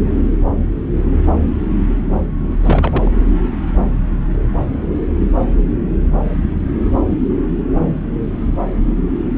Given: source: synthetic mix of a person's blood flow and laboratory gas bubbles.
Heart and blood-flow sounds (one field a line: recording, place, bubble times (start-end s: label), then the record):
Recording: Doppler ultrasound of blood flow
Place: subclavian vein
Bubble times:
2.60-3.11 s: bubbles
From the record:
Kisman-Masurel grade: 212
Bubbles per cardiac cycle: several, 3 to 8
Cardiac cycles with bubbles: 1 to 10%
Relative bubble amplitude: moderate (0.250 to 0.450)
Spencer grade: 1 (occasional bubble signal discernible with the cardiac motion signal, with majority of cardiac periods free of bubbles)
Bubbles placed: anywhere in the cardiac cycle